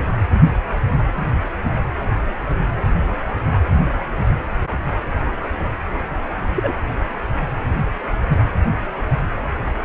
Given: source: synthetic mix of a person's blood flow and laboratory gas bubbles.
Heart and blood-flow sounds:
Doppler ultrasound of blood flow; precordium
6.54-6.74 s: bubbles
From the record:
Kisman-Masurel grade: 112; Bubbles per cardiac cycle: 1 to 2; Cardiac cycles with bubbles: 1 to 10%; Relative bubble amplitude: moderate (0.250 to 0.450); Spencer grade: 1 (occasional bubble signal discernible with the cardiac motion signal, with majority of cardiac periods free of bubbles); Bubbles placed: anywhere in the cardiac cycle

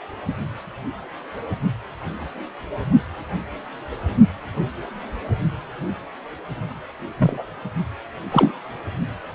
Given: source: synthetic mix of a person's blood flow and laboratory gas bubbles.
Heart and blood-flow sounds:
Doppler ultrasound of blood flow; precordium
7.17-7.44 s: bubbles
8.31-8.51 s: bubbles
From the record:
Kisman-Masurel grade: 122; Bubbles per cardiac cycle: 1 to 2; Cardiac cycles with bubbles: 10 to 50%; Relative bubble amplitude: moderate (0.250 to 0.450); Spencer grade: 2 (many but less than half of the cardiac periods contain bubble signals, singularly or in groups); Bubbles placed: only in the low amplitude regions of the cardiac cycle

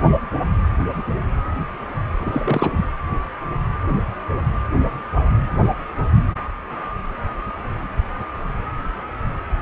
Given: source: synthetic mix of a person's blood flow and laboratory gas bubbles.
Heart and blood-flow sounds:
Doppler ultrasound of blood flow; precordium
2.20-2.71 s: bubbles
2.76-2.85 s: bubbles
From the record:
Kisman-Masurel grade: 212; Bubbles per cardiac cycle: several, 3 to 8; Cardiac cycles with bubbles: 1 to 10%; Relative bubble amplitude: moderate (0.250 to 0.450); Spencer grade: 1 (occasional bubble signal discernible with the cardiac motion signal, with majority of cardiac periods free of bubbles); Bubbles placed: anywhere in the cardiac cycle

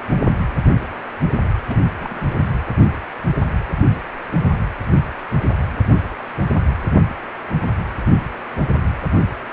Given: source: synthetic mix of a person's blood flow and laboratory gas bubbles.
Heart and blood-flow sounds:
Doppler ultrasound of blood flow; precordium
1.67-1.79 s: bubbles
2.00-2.33 s: bubbles
From the record:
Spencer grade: 1 (occasional bubble signal discernible with the cardiac motion signal, with majority of cardiac periods free of bubbles); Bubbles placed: anywhere in the cardiac cycle

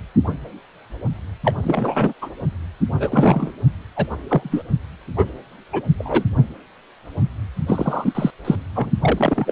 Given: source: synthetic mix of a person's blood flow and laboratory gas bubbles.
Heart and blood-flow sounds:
Doppler ultrasound of blood flow; precordium
1.44-1.54 s: bubbles
1.63-2.13 s: bubbles
2.22-2.29 s: bubbles
3.00-3.52 s: bubbles
3.96-4.07 s: bubbles
4.28-4.62 s: bubbles
5.17-5.25 s: bubbles
5.72-5.81 s: bubbles
5.98-6.25 s: bubbles
7.67-8.30 s: bubbles
8.44-8.55 s: bubbles
8.75-8.91 s: bubbles
9.00-9.52 s: bubbles
From the record:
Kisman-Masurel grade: 233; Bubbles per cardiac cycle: several, 3 to 8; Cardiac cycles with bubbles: 50 to 99%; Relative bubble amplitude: loud (0.450 to 0.775); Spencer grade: 3 (all of the cardiac periods contain showers or single bubble signals, but not dominating or overriding the cardiac motion signals); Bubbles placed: only in the low amplitude regions of the cardiac cycle

